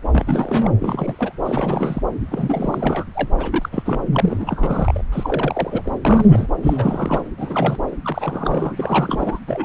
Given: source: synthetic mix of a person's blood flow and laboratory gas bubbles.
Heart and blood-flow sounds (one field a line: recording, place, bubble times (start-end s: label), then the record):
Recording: Doppler ultrasound of blood flow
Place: subclavian vein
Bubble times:
0.12-0.71 s: bubbles
0.80-1.35 s: bubbles
1.43-2.02 s: bubbles
2.27-3.04 s: bubbles
3.15-3.28 s: bubbles
3.38-3.69 s: bubbles
3.72-4.01 s: bubbles
4.12-5.04 s: bubbles
5.12-5.98 s: bubbles
6.05-6.47 s: bubbles
6.62-7.22 s: bubbles
7.38-7.77 s: bubbles
8.02-9.39 s: bubbles
9.47-9.65 s: bubbles
From the record:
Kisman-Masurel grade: 342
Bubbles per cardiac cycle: rolling drumbeat, 9 or more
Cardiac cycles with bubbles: 100%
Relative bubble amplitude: moderate (0.250 to 0.450)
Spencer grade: 3 (all of the cardiac periods contain showers or single bubble signals, but not dominating or overriding the cardiac motion signals)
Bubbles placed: anywhere in the cardiac cycle